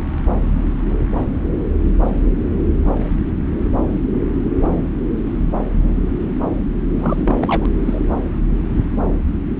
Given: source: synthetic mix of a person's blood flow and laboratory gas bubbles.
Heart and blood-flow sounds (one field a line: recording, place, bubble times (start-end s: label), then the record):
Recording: Doppler ultrasound of blood flow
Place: subclavian vein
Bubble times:
6.99-7.70 s: bubbles
7.86-8.00 s: bubbles
From the record:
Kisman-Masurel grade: 212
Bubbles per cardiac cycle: several, 3 to 8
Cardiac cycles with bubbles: 1 to 10%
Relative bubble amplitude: moderate (0.250 to 0.450)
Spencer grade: 1 (occasional bubble signal discernible with the cardiac motion signal, with majority of cardiac periods free of bubbles)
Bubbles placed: anywhere in the cardiac cycle